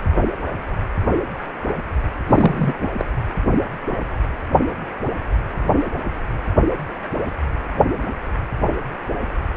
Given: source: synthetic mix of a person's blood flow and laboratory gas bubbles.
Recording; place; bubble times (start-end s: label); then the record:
Doppler ultrasound of blood flow; precordium
2.27-2.74 s: bubbles
2.81-2.89 s: bubbles
2.97-3.05 s: bubbles
From the record:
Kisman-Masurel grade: 212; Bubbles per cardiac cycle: several, 3 to 8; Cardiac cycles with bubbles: 1 to 10%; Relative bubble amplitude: moderate (0.250 to 0.450); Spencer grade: 1 (occasional bubble signal discernible with the cardiac motion signal, with majority of cardiac periods free of bubbles); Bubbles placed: anywhere in the cardiac cycle